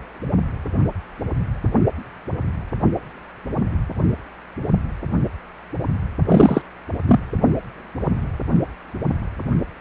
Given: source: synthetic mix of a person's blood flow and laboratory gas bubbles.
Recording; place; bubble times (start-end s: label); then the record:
Doppler ultrasound of blood flow; precordium
6.28-6.62 s: bubbles
7.07-7.20 s: bubbles
From the record:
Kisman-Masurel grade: 223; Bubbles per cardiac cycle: several, 3 to 8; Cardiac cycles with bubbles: 10 to 50%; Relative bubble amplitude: loud (0.450 to 0.775); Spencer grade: 2 (many but less than half of the cardiac periods contain bubble signals, singularly or in groups); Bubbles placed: only in the low amplitude regions of the cardiac cycle